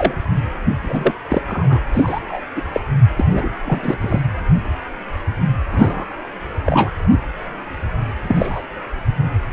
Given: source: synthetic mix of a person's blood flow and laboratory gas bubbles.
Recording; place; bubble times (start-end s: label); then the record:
Doppler ultrasound of blood flow; precordium
0.00-0.15 s: bubbles
0.82-1.17 s: bubbles
1.28-1.42 s: bubbles
1.48-1.81 s: bubbles
1.92-2.20 s: bubbles
2.27-2.40 s: bubbles
2.56-2.62 s: bubbles
2.73-2.80 s: bubbles
3.17-3.26 s: bubbles
3.30-3.49 s: bubbles
3.65-4.21 s: bubbles
5.72-6.06 s: bubbles
6.66-6.93 s: bubbles
8.23-8.62 s: bubbles
From the record:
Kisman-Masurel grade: 233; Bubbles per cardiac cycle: several, 3 to 8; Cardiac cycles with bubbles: 50 to 99%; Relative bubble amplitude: loud (0.450 to 0.775); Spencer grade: 3 (all of the cardiac periods contain showers or single bubble signals, but not dominating or overriding the cardiac motion signals); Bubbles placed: anywhere in the cardiac cycle